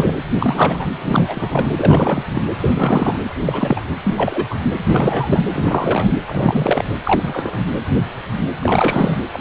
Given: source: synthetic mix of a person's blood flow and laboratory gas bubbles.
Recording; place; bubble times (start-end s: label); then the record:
Doppler ultrasound of blood flow; precordium
0.00-0.16 s: bubbles
0.40-0.85 s: bubbles
1.01-2.23 s: bubbles
2.33-2.42 s: bubbles
2.58-3.29 s: bubbles
3.45-3.81 s: bubbles
4.03-4.44 s: bubbles
4.50-4.57 s: bubbles
4.85-5.43 s: bubbles
5.52-6.12 s: bubbles
6.26-6.84 s: bubbles
7.04-7.60 s: bubbles
8.60-9.21 s: bubbles
9.32-9.41 s: bubbles
From the record:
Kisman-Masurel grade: 233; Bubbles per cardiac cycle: several, 3 to 8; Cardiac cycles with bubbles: 50 to 99%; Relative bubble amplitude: loud (0.450 to 0.775); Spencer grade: 3 (all of the cardiac periods contain showers or single bubble signals, but not dominating or overriding the cardiac motion signals); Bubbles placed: anywhere in the cardiac cycle